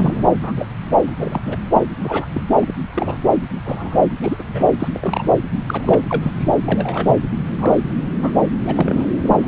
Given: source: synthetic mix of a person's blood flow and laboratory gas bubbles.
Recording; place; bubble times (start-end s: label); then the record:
Doppler ultrasound of blood flow; subclavian vein
0.00-0.23 s: bubbles
0.43-0.52 s: bubbles
0.56-0.66 s: bubbles
1.06-1.12 s: bubbles
1.17-1.41 s: bubbles
1.45-1.56 s: bubbles
1.73-1.83 s: bubbles
2.04-2.26 s: bubbles
2.33-2.41 s: bubbles
2.56-2.73 s: bubbles
2.94-3.17 s: bubbles
3.59-4.06 s: bubbles
4.21-4.37 s: bubbles
4.39-4.43 s: bubbles
4.53-4.69 s: bubbles
4.79-4.88 s: bubbles
4.93-5.38 s: bubbles
5.67-6.05 s: bubbles
6.08-6.32 s: bubbles
6.38-6.45 s: bubbles
6.66-7.17 s: bubbles
7.45-7.77 s: bubbles
8.21-8.31 s: bubbles
8.62-9.07 s: bubbles
9.23-9.35 s: bubbles
9.39-9.48 s: bubbles
From the record:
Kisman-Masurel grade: 242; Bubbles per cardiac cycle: several, 3 to 8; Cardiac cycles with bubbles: 100%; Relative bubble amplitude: moderate (0.250 to 0.450); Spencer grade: 3 (all of the cardiac periods contain showers or single bubble signals, but not dominating or overriding the cardiac motion signals); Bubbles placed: anywhere in the cardiac cycle